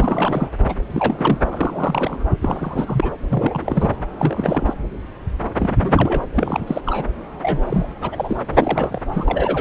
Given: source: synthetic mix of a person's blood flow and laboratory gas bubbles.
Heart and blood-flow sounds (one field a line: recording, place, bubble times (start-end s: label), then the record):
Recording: Doppler ultrasound of blood flow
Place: subclavian vein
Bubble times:
0.00-0.50 s: bubbles
0.66-0.75 s: bubbles
0.90-1.38 s: bubbles
1.50-2.23 s: bubbles
2.41-3.11 s: bubbles
3.29-3.90 s: bubbles
4.18-4.73 s: bubbles
5.58-5.76 s: bubbles
5.79-6.22 s: bubbles
6.34-6.82 s: bubbles
6.85-7.06 s: bubbles
7.42-7.88 s: bubbles
8.02-8.42 s: bubbles
8.53-9.02 s: bubbles
9.12-9.61 s: bubbles
From the record:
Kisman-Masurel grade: 332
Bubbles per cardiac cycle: rolling drumbeat, 9 or more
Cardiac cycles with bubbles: 50 to 99%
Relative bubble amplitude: moderate (0.250 to 0.450)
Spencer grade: 3 (all of the cardiac periods contain showers or single bubble signals, but not dominating or overriding the cardiac motion signals)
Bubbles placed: anywhere in the cardiac cycle